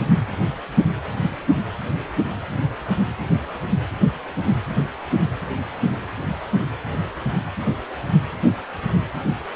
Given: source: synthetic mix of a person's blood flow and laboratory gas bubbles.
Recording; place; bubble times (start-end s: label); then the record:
Doppler ultrasound of blood flow; precordium
no bubbles
From the record:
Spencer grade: 0 (complete lack of bubble signals)